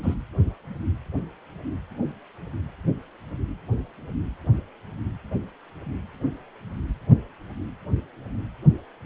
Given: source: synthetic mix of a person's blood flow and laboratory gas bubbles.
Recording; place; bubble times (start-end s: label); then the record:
Doppler ultrasound of blood flow; precordium
0.03-0.14 s: bubbles
From the record:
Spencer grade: 1 (occasional bubble signal discernible with the cardiac motion signal, with majority of cardiac periods free of bubbles); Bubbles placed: only in the low amplitude regions of the cardiac cycle